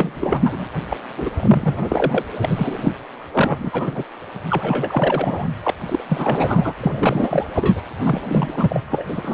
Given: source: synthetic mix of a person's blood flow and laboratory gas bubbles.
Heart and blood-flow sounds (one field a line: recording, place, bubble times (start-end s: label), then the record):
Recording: Doppler ultrasound of blood flow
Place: precordium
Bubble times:
0.00-0.41 s: bubbles
0.44-0.65 s: bubbles
0.90-0.97 s: bubbles
1.17-1.29 s: bubbles
1.36-2.24 s: bubbles
2.43-2.92 s: bubbles
3.33-4.04 s: bubbles
4.50-5.48 s: bubbles
5.63-5.71 s: bubbles
5.87-6.02 s: bubbles
6.09-6.73 s: bubbles
6.80-7.46 s: bubbles
7.55-7.81 s: bubbles
8.04-8.81 s: bubbles
8.91-9.34 s: bubbles
From the record:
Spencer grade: 3 (all of the cardiac periods contain showers or single bubble signals, but not dominating or overriding the cardiac motion signals)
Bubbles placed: anywhere in the cardiac cycle